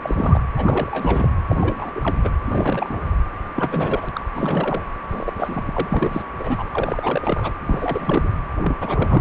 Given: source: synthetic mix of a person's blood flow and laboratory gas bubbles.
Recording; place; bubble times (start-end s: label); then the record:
Doppler ultrasound of blood flow; precordium
0.02-0.41 s: bubbles
0.56-1.34 s: bubbles
1.49-1.91 s: bubbles
1.95-2.16 s: bubbles
2.23-2.30 s: bubbles
2.48-3.09 s: bubbles
3.55-4.09 s: bubbles
4.13-4.21 s: bubbles
4.34-4.83 s: bubbles
5.09-5.33 s: bubbles
5.38-5.88 s: bubbles
5.91-6.22 s: bubbles
6.38-6.63 s: bubbles
6.71-7.55 s: bubbles
7.60-8.30 s: bubbles
8.62-9.21 s: bubbles
From the record:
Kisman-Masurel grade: 342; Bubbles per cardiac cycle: rolling drumbeat, 9 or more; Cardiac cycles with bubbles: 100%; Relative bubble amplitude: moderate (0.250 to 0.450); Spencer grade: 3 (all of the cardiac periods contain showers or single bubble signals, but not dominating or overriding the cardiac motion signals); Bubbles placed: anywhere in the cardiac cycle